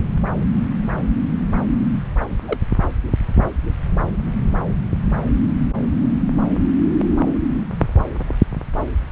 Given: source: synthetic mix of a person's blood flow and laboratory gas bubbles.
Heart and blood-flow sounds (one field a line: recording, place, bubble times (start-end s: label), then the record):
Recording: Doppler ultrasound of blood flow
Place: subclavian vein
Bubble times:
2.29-2.40 s: bubbles
2.48-2.57 s: bubbles
From the record:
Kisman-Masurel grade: 111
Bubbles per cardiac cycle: 1 to 2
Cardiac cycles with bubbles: 1 to 10%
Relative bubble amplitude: barely perceptible (0.100 to 0.250)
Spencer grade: 1 (occasional bubble signal discernible with the cardiac motion signal, with majority of cardiac periods free of bubbles)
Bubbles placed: anywhere in the cardiac cycle